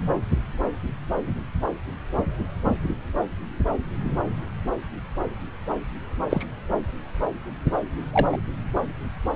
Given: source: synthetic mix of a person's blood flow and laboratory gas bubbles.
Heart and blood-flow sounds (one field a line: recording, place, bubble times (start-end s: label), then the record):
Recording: Doppler ultrasound of blood flow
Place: subclavian vein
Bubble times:
6.29-6.45 s: bubbles
8.13-8.27 s: bubbles
8.32-8.37 s: bubbles
From the record:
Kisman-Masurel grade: 122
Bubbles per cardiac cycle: 1 to 2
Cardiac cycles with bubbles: 10 to 50%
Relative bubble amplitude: moderate (0.250 to 0.450)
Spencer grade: 2 (many but less than half of the cardiac periods contain bubble signals, singularly or in groups)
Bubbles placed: anywhere in the cardiac cycle